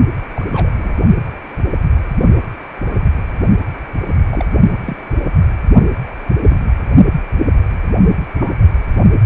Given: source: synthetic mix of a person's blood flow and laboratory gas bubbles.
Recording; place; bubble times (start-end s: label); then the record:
Doppler ultrasound of blood flow; precordium
0.36-0.95 s: bubbles
4.31-4.46 s: bubbles
4.84-4.97 s: bubbles
6.41-6.57 s: bubbles
8.38-8.54 s: bubbles
From the record:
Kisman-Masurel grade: 121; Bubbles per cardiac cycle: 1 to 2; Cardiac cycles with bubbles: 10 to 50%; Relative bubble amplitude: barely perceptible (0.100 to 0.250); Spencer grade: 2 (many but less than half of the cardiac periods contain bubble signals, singularly or in groups); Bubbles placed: only in the low amplitude regions of the cardiac cycle